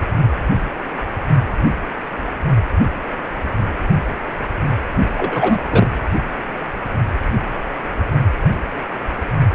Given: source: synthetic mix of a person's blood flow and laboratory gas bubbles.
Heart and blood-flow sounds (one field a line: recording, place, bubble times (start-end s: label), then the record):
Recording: Doppler ultrasound of blood flow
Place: precordium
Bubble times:
4.98-5.08 s: bubbles
5.17-5.59 s: bubbles
5.71-5.88 s: bubbles
From the record:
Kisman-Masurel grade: 213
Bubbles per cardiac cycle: several, 3 to 8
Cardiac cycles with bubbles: 1 to 10%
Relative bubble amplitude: loud (0.450 to 0.775)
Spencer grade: 1 (occasional bubble signal discernible with the cardiac motion signal, with majority of cardiac periods free of bubbles)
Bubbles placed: anywhere in the cardiac cycle